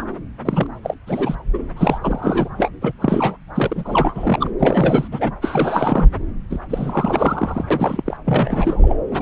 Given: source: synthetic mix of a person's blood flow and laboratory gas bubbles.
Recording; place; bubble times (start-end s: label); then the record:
Doppler ultrasound of blood flow; subclavian vein
0.00-0.05 s: bubbles
0.45-0.66 s: bubbles
0.84-0.96 s: bubbles
1.06-1.35 s: bubbles
1.54-1.63 s: bubbles
1.76-1.99 s: bubbles
2.02-2.49 s: bubbles
2.58-2.70 s: bubbles
2.81-2.92 s: bubbles
3.01-3.37 s: bubbles
3.54-4.50 s: bubbles
4.59-5.08 s: bubbles
5.11-5.32 s: bubbles
5.42-6.08 s: bubbles
6.50-6.59 s: bubbles
6.69-7.65 s: bubbles
7.70-8.03 s: bubbles
8.06-8.17 s: bubbles
8.25-8.96 s: bubbles
9.11-9.22 s: bubbles
From the record:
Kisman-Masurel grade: 342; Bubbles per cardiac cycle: rolling drumbeat, 9 or more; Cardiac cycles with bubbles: 100%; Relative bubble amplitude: moderate (0.250 to 0.450); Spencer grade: 3 (all of the cardiac periods contain showers or single bubble signals, but not dominating or overriding the cardiac motion signals); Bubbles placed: anywhere in the cardiac cycle